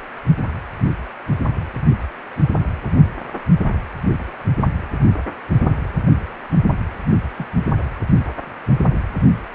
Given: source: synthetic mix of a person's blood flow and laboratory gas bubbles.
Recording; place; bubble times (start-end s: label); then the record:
Doppler ultrasound of blood flow; precordium
7.38-7.46 s: bubbles
From the record:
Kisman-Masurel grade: 121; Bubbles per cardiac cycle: 1 to 2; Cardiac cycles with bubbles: 10 to 50%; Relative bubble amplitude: barely perceptible (0.100 to 0.250); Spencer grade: 2 (many but less than half of the cardiac periods contain bubble signals, singularly or in groups); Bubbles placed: anywhere in the cardiac cycle